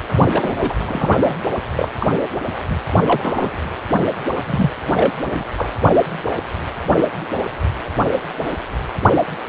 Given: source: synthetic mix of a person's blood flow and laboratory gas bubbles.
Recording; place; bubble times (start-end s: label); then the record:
Doppler ultrasound of blood flow; precordium
0.28-0.76 s: bubbles
0.85-1.36 s: bubbles
1.76-1.88 s: bubbles
2.00-2.08 s: bubbles
2.70-2.76 s: bubbles
3.06-3.58 s: bubbles
4.35-4.41 s: bubbles
4.46-4.70 s: bubbles
4.95-5.11 s: bubbles
5.25-5.43 s: bubbles
5.57-5.70 s: bubbles
From the record:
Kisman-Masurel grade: 232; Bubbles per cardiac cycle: several, 3 to 8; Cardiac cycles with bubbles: 50 to 99%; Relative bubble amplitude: moderate (0.250 to 0.450); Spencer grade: 3 (all of the cardiac periods contain showers or single bubble signals, but not dominating or overriding the cardiac motion signals); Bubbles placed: only in the low amplitude regions of the cardiac cycle